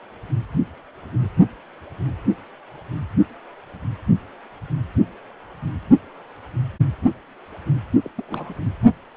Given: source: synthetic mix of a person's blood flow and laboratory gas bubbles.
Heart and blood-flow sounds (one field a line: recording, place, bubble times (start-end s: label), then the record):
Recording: Doppler ultrasound of blood flow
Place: precordium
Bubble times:
8.04-8.11 s: bubbles
8.17-8.25 s: bubbles
8.27-8.54 s: bubbles
From the record:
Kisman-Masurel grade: 211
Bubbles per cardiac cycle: several, 3 to 8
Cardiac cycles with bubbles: 1 to 10%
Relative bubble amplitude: barely perceptible (0.100 to 0.250)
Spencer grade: 1 (occasional bubble signal discernible with the cardiac motion signal, with majority of cardiac periods free of bubbles)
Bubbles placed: only in the low amplitude regions of the cardiac cycle